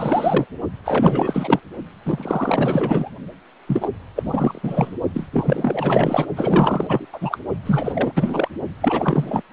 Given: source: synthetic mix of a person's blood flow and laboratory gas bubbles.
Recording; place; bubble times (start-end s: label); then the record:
Doppler ultrasound of blood flow; precordium
0.00-0.46 s: bubbles
0.85-1.60 s: bubbles
2.04-3.09 s: bubbles
3.67-3.89 s: bubbles
4.15-4.94 s: bubbles
5.14-5.27 s: bubbles
5.33-6.25 s: bubbles
6.36-7.07 s: bubbles
7.12-7.38 s: bubbles
7.66-8.12 s: bubbles
8.14-8.48 s: bubbles
8.80-9.43 s: bubbles
From the record:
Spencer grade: 4 (maximum detectable bubble signal sounding continuously throughout systole and diastole of every cardiac period, and overriding the amplitude of the normal cardiac signals); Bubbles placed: only in the low amplitude regions of the cardiac cycle